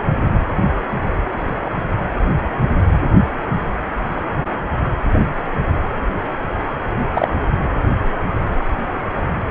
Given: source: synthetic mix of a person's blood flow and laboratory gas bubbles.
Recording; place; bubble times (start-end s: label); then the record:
Doppler ultrasound of blood flow; precordium
7.14-7.28 s: bubbles
From the record:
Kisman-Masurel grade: 113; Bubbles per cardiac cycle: 1 to 2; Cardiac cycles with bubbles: 1 to 10%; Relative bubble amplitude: loud (0.450 to 0.775); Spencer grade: 1 (occasional bubble signal discernible with the cardiac motion signal, with majority of cardiac periods free of bubbles); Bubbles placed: anywhere in the cardiac cycle